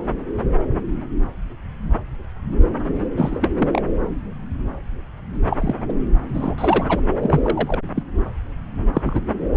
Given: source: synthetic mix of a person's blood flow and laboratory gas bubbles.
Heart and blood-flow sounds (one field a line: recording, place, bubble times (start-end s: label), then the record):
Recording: Doppler ultrasound of blood flow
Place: subclavian vein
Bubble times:
3.17-3.49 s: bubbles
3.59-3.81 s: bubbles
5.49-5.57 s: bubbles
5.60-5.75 s: bubbles
5.89-5.92 s: bubbles
6.34-6.55 s: bubbles
6.58-7.01 s: bubbles
7.21-7.41 s: bubbles
7.44-7.80 s: bubbles
7.95-8.03 s: bubbles
8.94-9.21 s: bubbles
From the record:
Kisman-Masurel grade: 222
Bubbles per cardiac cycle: several, 3 to 8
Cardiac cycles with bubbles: 10 to 50%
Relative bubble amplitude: moderate (0.250 to 0.450)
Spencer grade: 2 (many but less than half of the cardiac periods contain bubble signals, singularly or in groups)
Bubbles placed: anywhere in the cardiac cycle